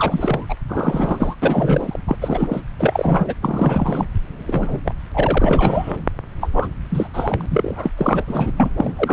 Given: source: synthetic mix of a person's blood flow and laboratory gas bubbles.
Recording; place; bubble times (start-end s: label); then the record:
Doppler ultrasound of blood flow; subclavian vein
0.00-0.45 s: bubbles
0.49-0.55 s: bubbles
0.69-1.35 s: bubbles
1.42-1.99 s: bubbles
2.08-2.17 s: bubbles
2.21-2.61 s: bubbles
2.79-3.34 s: bubbles
3.42-4.06 s: bubbles
4.46-4.80 s: bubbles
4.85-4.95 s: bubbles
5.14-5.97 s: bubbles
6.41-6.49 s: bubbles
6.53-6.67 s: bubbles
6.90-7.08 s: bubbles
7.13-7.46 s: bubbles
7.50-7.90 s: bubbles
7.97-8.25 s: bubbles
8.28-8.52 s: bubbles
8.56-8.69 s: bubbles
8.77-8.93 s: bubbles
8.96-9.13 s: bubbles
From the record:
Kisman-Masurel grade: 342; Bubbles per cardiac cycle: rolling drumbeat, 9 or more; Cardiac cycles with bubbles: 100%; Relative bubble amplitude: moderate (0.250 to 0.450); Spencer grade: 3 (all of the cardiac periods contain showers or single bubble signals, but not dominating or overriding the cardiac motion signals); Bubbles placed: anywhere in the cardiac cycle